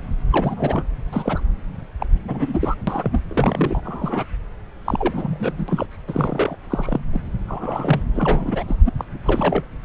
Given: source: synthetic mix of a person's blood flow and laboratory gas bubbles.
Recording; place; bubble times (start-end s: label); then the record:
Doppler ultrasound of blood flow; subclavian vein
0.30-0.84 s: bubbles
1.12-1.43 s: bubbles
2.00-2.06 s: bubbles
2.28-2.75 s: bubbles
2.87-3.22 s: bubbles
3.31-3.81 s: bubbles
3.85-4.25 s: bubbles
4.84-5.86 s: bubbles
6.07-6.56 s: bubbles
6.70-7.00 s: bubbles
7.12-7.20 s: bubbles
7.47-8.04 s: bubbles
8.15-8.63 s: bubbles
8.68-8.77 s: bubbles
8.86-8.92 s: bubbles
8.98-9.04 s: bubbles
9.24-9.64 s: bubbles
From the record:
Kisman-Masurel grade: 242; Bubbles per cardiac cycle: several, 3 to 8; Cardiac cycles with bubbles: 100%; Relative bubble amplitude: moderate (0.250 to 0.450); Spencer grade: 3 (all of the cardiac periods contain showers or single bubble signals, but not dominating or overriding the cardiac motion signals); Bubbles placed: anywhere in the cardiac cycle